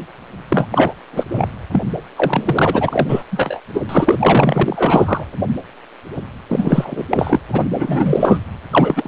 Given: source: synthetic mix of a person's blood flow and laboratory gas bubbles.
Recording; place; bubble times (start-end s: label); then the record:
Doppler ultrasound of blood flow; precordium
0.49-0.67 s: bubbles
0.72-0.93 s: bubbles
1.13-1.26 s: bubbles
1.31-1.47 s: bubbles
1.71-1.81 s: bubbles
2.16-3.23 s: bubbles
3.31-3.60 s: bubbles
3.74-3.82 s: bubbles
3.89-5.24 s: bubbles
6.49-7.03 s: bubbles
7.09-7.41 s: bubbles
7.52-7.67 s: bubbles
7.71-8.39 s: bubbles
8.71-9.08 s: bubbles
From the record:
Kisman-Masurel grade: 333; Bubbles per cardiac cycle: rolling drumbeat, 9 or more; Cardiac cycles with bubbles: 50 to 99%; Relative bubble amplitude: loud (0.450 to 0.775); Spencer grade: 3 (all of the cardiac periods contain showers or single bubble signals, but not dominating or overriding the cardiac motion signals); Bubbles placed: anywhere in the cardiac cycle